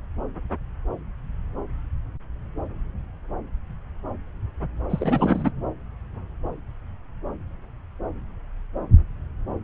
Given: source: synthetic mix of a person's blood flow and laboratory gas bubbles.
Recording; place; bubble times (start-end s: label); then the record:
Doppler ultrasound of blood flow; subclavian vein
4.89-5.51 s: bubbles
From the record:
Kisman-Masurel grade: 212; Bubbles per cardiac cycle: several, 3 to 8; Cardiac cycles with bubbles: 1 to 10%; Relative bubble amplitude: moderate (0.250 to 0.450); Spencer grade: 1 (occasional bubble signal discernible with the cardiac motion signal, with majority of cardiac periods free of bubbles); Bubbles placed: anywhere in the cardiac cycle